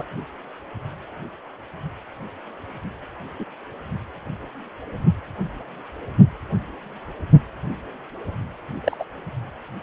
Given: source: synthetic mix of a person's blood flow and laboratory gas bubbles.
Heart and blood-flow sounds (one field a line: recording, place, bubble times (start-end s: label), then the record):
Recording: Doppler ultrasound of blood flow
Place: precordium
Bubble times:
0.00-0.03 s: bubbles
3.39-3.45 s: bubbles
8.84-9.04 s: bubbles
From the record:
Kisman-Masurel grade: 122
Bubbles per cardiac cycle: 1 to 2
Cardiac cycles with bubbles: 10 to 50%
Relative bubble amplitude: moderate (0.250 to 0.450)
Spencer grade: 2 (many but less than half of the cardiac periods contain bubble signals, singularly or in groups)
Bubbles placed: anywhere in the cardiac cycle